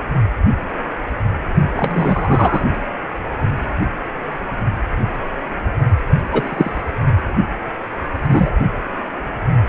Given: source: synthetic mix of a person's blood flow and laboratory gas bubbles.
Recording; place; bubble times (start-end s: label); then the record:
Doppler ultrasound of blood flow; precordium
1.76-2.65 s: bubbles
6.31-6.81 s: bubbles
8.14-8.51 s: bubbles
From the record:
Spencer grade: 2 (many but less than half of the cardiac periods contain bubble signals, singularly or in groups); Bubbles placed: only in the low amplitude regions of the cardiac cycle